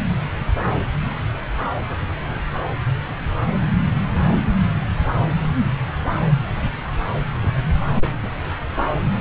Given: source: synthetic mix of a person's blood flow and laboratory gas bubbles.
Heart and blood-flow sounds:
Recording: Doppler ultrasound of blood flow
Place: subclavian vein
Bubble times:
7.40-7.46 s: bubbles
7.94-8.35 s: bubbles
From the record:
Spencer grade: 1 (occasional bubble signal discernible with the cardiac motion signal, with majority of cardiac periods free of bubbles)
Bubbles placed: anywhere in the cardiac cycle

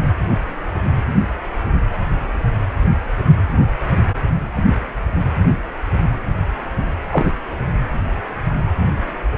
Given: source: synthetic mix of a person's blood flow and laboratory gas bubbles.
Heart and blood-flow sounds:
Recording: Doppler ultrasound of blood flow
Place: precordium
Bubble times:
7.11-7.33 s: bubbles
From the record:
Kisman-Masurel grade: 123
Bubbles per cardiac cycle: 1 to 2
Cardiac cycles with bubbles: 10 to 50%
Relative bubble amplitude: loud (0.450 to 0.775)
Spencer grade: 2 (many but less than half of the cardiac periods contain bubble signals, singularly or in groups)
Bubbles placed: anywhere in the cardiac cycle

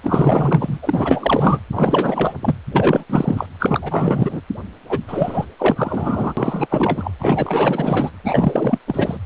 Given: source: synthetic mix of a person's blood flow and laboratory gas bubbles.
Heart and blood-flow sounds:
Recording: Doppler ultrasound of blood flow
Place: precordium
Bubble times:
0.03-0.79 s: bubbles
0.82-1.60 s: bubbles
1.71-2.34 s: bubbles
2.42-2.56 s: bubbles
2.71-3.04 s: bubbles
3.09-3.46 s: bubbles
3.59-4.41 s: bubbles
4.89-5.00 s: bubbles
5.08-5.46 s: bubbles
5.58-6.34 s: bubbles
6.37-7.11 s: bubbles
7.19-8.11 s: bubbles
8.24-8.79 s: bubbles
8.87-9.18 s: bubbles
From the record:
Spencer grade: 4 (maximum detectable bubble signal sounding continuously throughout systole and diastole of every cardiac period, and overriding the amplitude of the normal cardiac signals)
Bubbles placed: anywhere in the cardiac cycle

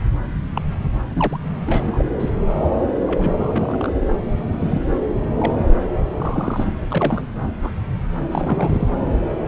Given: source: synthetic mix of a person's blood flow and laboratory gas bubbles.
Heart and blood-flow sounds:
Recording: Doppler ultrasound of blood flow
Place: subclavian vein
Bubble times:
0.55-0.61 s: bubbles
0.82-0.90 s: bubbles
1.09-1.38 s: bubbles
1.67-2.04 s: bubbles
2.19-2.29 s: bubbles
3.07-3.32 s: bubbles
3.38-3.92 s: bubbles
4.38-4.44 s: bubbles
4.54-4.83 s: bubbles
5.38-5.52 s: bubbles
6.13-6.67 s: bubbles
6.91-7.25 s: bubbles
7.62-7.70 s: bubbles
8.31-8.88 s: bubbles
From the record:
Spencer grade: 3 (all of the cardiac periods contain showers or single bubble signals, but not dominating or overriding the cardiac motion signals)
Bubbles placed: anywhere in the cardiac cycle

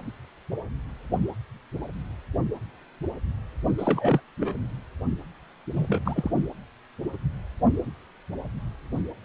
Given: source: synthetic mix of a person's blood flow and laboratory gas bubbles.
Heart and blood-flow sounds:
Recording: Doppler ultrasound of blood flow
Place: precordium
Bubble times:
3.78-4.21 s: bubbles
4.39-4.64 s: bubbles
5.74-6.31 s: bubbles
From the record:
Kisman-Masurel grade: 221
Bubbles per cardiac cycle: several, 3 to 8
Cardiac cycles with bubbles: 10 to 50%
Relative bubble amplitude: barely perceptible (0.100 to 0.250)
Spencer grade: 2 (many but less than half of the cardiac periods contain bubble signals, singularly or in groups)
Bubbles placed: only in the low amplitude regions of the cardiac cycle

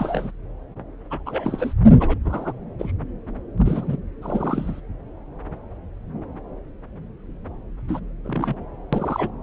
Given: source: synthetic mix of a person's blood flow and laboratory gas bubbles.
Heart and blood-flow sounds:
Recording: Doppler ultrasound of blood flow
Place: subclavian vein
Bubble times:
0.00-0.31 s: bubbles
1.10-1.23 s: bubbles
1.25-1.73 s: bubbles
2.00-2.18 s: bubbles
2.25-2.53 s: bubbles
2.79-2.92 s: bubbles
3.58-3.97 s: bubbles
4.22-4.80 s: bubbles
7.88-8.00 s: bubbles
8.25-8.55 s: bubbles
8.93-9.29 s: bubbles
From the record:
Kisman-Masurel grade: 232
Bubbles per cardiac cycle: several, 3 to 8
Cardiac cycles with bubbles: 50 to 99%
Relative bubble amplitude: moderate (0.250 to 0.450)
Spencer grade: 3 (all of the cardiac periods contain showers or single bubble signals, but not dominating or overriding the cardiac motion signals)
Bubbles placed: anywhere in the cardiac cycle

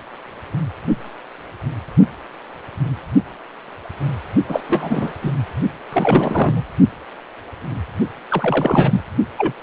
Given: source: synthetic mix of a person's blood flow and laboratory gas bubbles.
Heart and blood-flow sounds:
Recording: Doppler ultrasound of blood flow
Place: precordium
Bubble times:
4.48-4.62 s: bubbles
4.69-5.12 s: bubbles
5.22-5.31 s: bubbles
5.93-6.64 s: bubbles
8.29-9.01 s: bubbles
9.38-9.53 s: bubbles
From the record:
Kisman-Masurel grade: 333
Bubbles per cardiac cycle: rolling drumbeat, 9 or more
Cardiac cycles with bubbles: 50 to 99%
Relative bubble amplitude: loud (0.450 to 0.775)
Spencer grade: 3 (all of the cardiac periods contain showers or single bubble signals, but not dominating or overriding the cardiac motion signals)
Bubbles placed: only in the low amplitude regions of the cardiac cycle

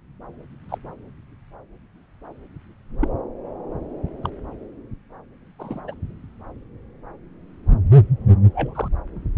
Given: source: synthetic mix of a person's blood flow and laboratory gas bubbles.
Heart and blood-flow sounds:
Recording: Doppler ultrasound of blood flow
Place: subclavian vein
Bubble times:
0.69-0.78 s: bubbles
3.00-3.08 s: bubbles
4.23-4.29 s: bubbles
5.59-5.81 s: bubbles
5.88-5.94 s: bubbles
8.54-8.88 s: bubbles
From the record:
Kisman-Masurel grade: 122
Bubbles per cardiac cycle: 1 to 2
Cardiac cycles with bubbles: 10 to 50%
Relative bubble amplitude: moderate (0.250 to 0.450)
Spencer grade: 2 (many but less than half of the cardiac periods contain bubble signals, singularly or in groups)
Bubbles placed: anywhere in the cardiac cycle

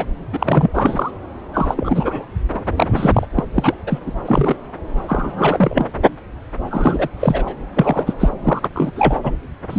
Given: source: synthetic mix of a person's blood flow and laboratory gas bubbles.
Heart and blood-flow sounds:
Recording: Doppler ultrasound of blood flow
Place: subclavian vein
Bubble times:
0.00-0.06 s: bubbles
0.32-0.70 s: bubbles
0.73-1.11 s: bubbles
1.53-2.26 s: bubbles
2.77-3.26 s: bubbles
3.36-3.44 s: bubbles
3.55-3.74 s: bubbles
3.87-3.99 s: bubbles
4.06-4.12 s: bubbles
4.25-4.55 s: bubbles
5.08-5.85 s: bubbles
6.71-7.08 s: bubbles
7.20-7.54 s: bubbles
7.75-8.13 s: bubbles
8.19-8.29 s: bubbles
8.43-8.69 s: bubbles
8.73-8.90 s: bubbles
8.96-9.19 s: bubbles
9.23-9.31 s: bubbles
9.70-9.79 s: bubbles
From the record:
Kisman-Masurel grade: 333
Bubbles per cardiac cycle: rolling drumbeat, 9 or more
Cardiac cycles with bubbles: 50 to 99%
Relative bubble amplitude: loud (0.450 to 0.775)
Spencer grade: 3 (all of the cardiac periods contain showers or single bubble signals, but not dominating or overriding the cardiac motion signals)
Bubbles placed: anywhere in the cardiac cycle

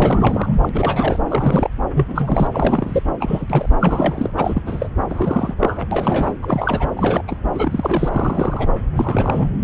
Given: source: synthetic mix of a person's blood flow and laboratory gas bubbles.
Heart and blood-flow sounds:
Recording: Doppler ultrasound of blood flow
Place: subclavian vein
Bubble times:
0.00-0.69 s: bubbles
0.73-1.20 s: bubbles
1.28-1.69 s: bubbles
1.94-2.48 s: bubbles
2.52-3.02 s: bubbles
3.20-3.46 s: bubbles
3.50-3.69 s: bubbles
3.80-4.30 s: bubbles
4.37-4.62 s: bubbles
4.66-4.88 s: bubbles
5.09-5.54 s: bubbles
5.59-5.88 s: bubbles
5.91-6.36 s: bubbles
6.42-6.89 s: bubbles
6.96-7.22 s: bubbles
7.28-7.35 s: bubbles
7.54-8.69 s: bubbles
8.97-9.48 s: bubbles
From the record:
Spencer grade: 3 (all of the cardiac periods contain showers or single bubble signals, but not dominating or overriding the cardiac motion signals)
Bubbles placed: anywhere in the cardiac cycle

